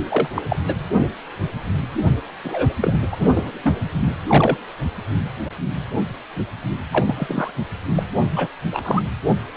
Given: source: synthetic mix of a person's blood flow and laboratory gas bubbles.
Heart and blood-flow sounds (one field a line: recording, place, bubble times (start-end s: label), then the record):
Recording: Doppler ultrasound of blood flow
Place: precordium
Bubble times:
0.00-0.03 s: bubbles
0.09-0.29 s: bubbles
0.34-0.42 s: bubbles
0.49-0.56 s: bubbles
0.67-0.73 s: bubbles
2.43-2.74 s: bubbles
2.82-2.98 s: bubbles
3.12-3.51 s: bubbles
3.63-3.77 s: bubbles
4.00-4.12 s: bubbles
4.27-4.58 s: bubbles
6.92-7.52 s: bubbles
7.95-8.03 s: bubbles
8.36-8.47 s: bubbles
8.72-9.02 s: bubbles
From the record:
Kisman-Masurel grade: 233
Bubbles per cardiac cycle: several, 3 to 8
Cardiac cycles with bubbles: 50 to 99%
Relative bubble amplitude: loud (0.450 to 0.775)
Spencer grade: 3 (all of the cardiac periods contain showers or single bubble signals, but not dominating or overriding the cardiac motion signals)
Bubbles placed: anywhere in the cardiac cycle